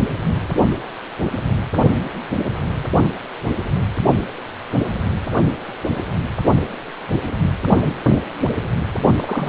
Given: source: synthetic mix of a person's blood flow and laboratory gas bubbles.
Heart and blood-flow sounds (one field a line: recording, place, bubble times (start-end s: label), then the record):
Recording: Doppler ultrasound of blood flow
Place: precordium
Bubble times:
9.16-9.49 s: bubbles
From the record:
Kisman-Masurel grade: 211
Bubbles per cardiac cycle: several, 3 to 8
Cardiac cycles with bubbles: 1 to 10%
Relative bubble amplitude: barely perceptible (0.100 to 0.250)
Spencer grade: 1 (occasional bubble signal discernible with the cardiac motion signal, with majority of cardiac periods free of bubbles)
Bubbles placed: only in the low amplitude regions of the cardiac cycle